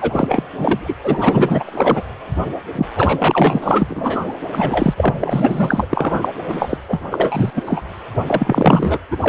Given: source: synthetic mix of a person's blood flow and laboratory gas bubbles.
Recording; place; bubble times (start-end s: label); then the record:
Doppler ultrasound of blood flow; precordium
0.01-0.43 s: bubbles
0.58-0.98 s: bubbles
1.03-2.03 s: bubbles
2.75-2.86 s: bubbles
2.96-4.34 s: bubbles
4.52-4.94 s: bubbles
4.96-5.86 s: bubbles
5.89-6.29 s: bubbles
6.46-6.78 s: bubbles
6.88-7.01 s: bubbles
7.10-7.51 s: bubbles
7.55-7.63 s: bubbles
7.66-7.81 s: bubbles
8.27-8.99 s: bubbles
9.11-9.17 s: bubbles
9.20-9.29 s: bubbles
From the record:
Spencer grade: 4 (maximum detectable bubble signal sounding continuously throughout systole and diastole of every cardiac period, and overriding the amplitude of the normal cardiac signals); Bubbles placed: anywhere in the cardiac cycle